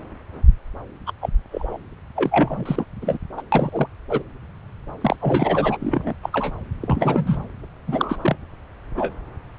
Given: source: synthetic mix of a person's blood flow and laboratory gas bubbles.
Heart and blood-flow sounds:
Doppler ultrasound of blood flow; subclavian vein
1.06-1.12 s: bubbles
1.21-1.29 s: bubbles
1.51-1.77 s: bubbles
2.16-2.85 s: bubbles
3.02-3.18 s: bubbles
3.37-3.42 s: bubbles
3.52-3.88 s: bubbles
4.10-4.23 s: bubbles
5.01-5.16 s: bubbles
5.21-5.77 s: bubbles
5.80-6.13 s: bubbles
6.22-6.30 s: bubbles
6.33-6.53 s: bubbles
6.80-7.37 s: bubbles
7.87-8.36 s: bubbles
8.96-9.14 s: bubbles
From the record:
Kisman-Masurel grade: 242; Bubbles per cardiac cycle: several, 3 to 8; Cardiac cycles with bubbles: 100%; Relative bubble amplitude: moderate (0.250 to 0.450); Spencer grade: 3 (all of the cardiac periods contain showers or single bubble signals, but not dominating or overriding the cardiac motion signals); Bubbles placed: anywhere in the cardiac cycle

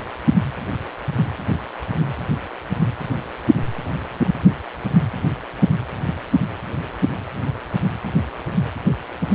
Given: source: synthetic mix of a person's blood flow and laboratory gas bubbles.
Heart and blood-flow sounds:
Doppler ultrasound of blood flow; precordium
no bubbles
From the record:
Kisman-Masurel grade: 000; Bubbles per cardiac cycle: 0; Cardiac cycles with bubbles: 0%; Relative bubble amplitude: no bubbles discernible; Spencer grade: 0 (complete lack of bubble signals)

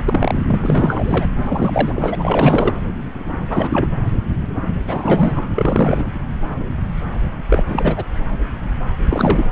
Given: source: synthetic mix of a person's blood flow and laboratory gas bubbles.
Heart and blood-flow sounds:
Doppler ultrasound of blood flow; subclavian vein
0.00-0.35 s: bubbles
0.47-1.26 s: bubbles
1.41-2.16 s: bubbles
2.18-2.73 s: bubbles
3.50-3.88 s: bubbles
4.88-5.47 s: bubbles
5.55-6.05 s: bubbles
7.50-7.64 s: bubbles
7.67-8.04 s: bubbles
9.07-9.49 s: bubbles
From the record:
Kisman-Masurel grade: 333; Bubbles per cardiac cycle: rolling drumbeat, 9 or more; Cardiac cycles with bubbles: 50 to 99%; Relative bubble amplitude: loud (0.450 to 0.775); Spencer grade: 3 (all of the cardiac periods contain showers or single bubble signals, but not dominating or overriding the cardiac motion signals); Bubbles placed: anywhere in the cardiac cycle

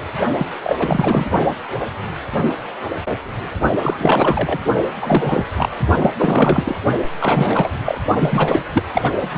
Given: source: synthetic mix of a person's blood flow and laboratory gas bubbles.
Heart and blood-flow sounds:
Doppler ultrasound of blood flow; precordium
0.38-0.47 s: bubbles
0.64-0.76 s: bubbles
0.79-1.29 s: bubbles
3.82-4.59 s: bubbles
5.01-5.43 s: bubbles
5.57-5.69 s: bubbles
5.99-6.10 s: bubbles
6.17-6.79 s: bubbles
7.21-7.69 s: bubbles
7.85-7.98 s: bubbles
8.20-8.64 s: bubbles
8.73-8.86 s: bubbles
8.95-9.10 s: bubbles
9.22-9.29 s: bubbles
9.34-9.38 s: bubbles
From the record:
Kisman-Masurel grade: 333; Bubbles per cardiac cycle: rolling drumbeat, 9 or more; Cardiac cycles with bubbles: 50 to 99%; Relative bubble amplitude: loud (0.450 to 0.775); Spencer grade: 3 (all of the cardiac periods contain showers or single bubble signals, but not dominating or overriding the cardiac motion signals); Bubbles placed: only in the low amplitude regions of the cardiac cycle

